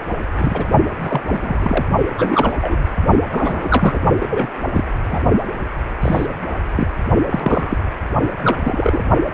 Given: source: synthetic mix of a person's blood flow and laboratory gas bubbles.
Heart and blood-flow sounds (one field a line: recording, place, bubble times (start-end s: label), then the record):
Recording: Doppler ultrasound of blood flow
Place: precordium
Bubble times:
0.38-0.71 s: bubbles
1.02-1.21 s: bubbles
1.26-1.38 s: bubbles
1.42-1.85 s: bubbles
2.18-2.87 s: bubbles
3.31-4.00 s: bubbles
4.19-4.47 s: bubbles
4.74-4.84 s: bubbles
5.05-5.21 s: bubbles
6.01-6.26 s: bubbles
6.75-6.88 s: bubbles
7.29-7.78 s: bubbles
8.44-8.58 s: bubbles
8.61-9.04 s: bubbles
From the record:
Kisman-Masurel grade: 232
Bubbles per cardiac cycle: several, 3 to 8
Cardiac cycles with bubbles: 50 to 99%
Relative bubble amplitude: moderate (0.250 to 0.450)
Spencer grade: 3 (all of the cardiac periods contain showers or single bubble signals, but not dominating or overriding the cardiac motion signals)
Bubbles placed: only in the low amplitude regions of the cardiac cycle